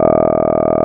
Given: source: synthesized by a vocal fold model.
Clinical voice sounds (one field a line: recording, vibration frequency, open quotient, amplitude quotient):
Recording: sustained vowel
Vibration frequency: 40 Hz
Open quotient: 0.1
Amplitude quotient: 1.1